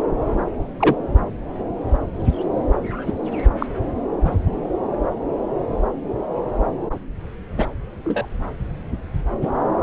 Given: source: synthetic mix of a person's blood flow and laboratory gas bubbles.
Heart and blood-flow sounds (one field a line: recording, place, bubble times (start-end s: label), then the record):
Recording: Doppler ultrasound of blood flow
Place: subclavian vein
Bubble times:
0.80-0.95 s: bubbles
3.07-3.13 s: bubbles
3.31-3.40 s: bubbles
3.60-3.66 s: bubbles
4.25-4.34 s: bubbles
7.57-7.67 s: bubbles
8.04-8.26 s: bubbles
9.41-9.48 s: bubbles
From the record:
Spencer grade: 2 (many but less than half of the cardiac periods contain bubble signals, singularly or in groups)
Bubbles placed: anywhere in the cardiac cycle